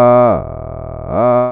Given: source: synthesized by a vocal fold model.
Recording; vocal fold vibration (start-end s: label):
sustained vowel that changes in the middle
0.00-0.25 s: 123.0 Hz, open quotient 0.36
0.45-1.05 s: 40.0 Hz, open quotient 0.32
1.25-1.52 s: 123.0 Hz, open quotient 0.36